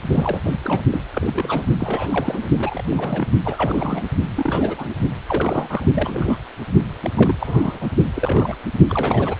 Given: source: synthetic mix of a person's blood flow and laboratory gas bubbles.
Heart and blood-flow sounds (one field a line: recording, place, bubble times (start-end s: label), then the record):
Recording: Doppler ultrasound of blood flow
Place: precordium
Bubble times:
0.11-0.40 s: bubbles
0.43-0.55 s: bubbles
0.64-0.82 s: bubbles
0.92-1.02 s: bubbles
1.12-1.65 s: bubbles
1.79-2.47 s: bubbles
2.59-2.83 s: bubbles
2.87-3.28 s: bubbles
3.44-4.07 s: bubbles
4.35-4.96 s: bubbles
5.27-5.85 s: bubbles
5.94-6.38 s: bubbles
7.03-7.09 s: bubbles
7.15-7.36 s: bubbles
7.40-7.88 s: bubbles
8.15-8.55 s: bubbles
8.89-9.35 s: bubbles
From the record:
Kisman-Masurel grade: 342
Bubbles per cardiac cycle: rolling drumbeat, 9 or more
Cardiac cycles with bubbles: 100%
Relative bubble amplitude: moderate (0.250 to 0.450)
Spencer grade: 3 (all of the cardiac periods contain showers or single bubble signals, but not dominating or overriding the cardiac motion signals)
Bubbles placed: only in the low amplitude regions of the cardiac cycle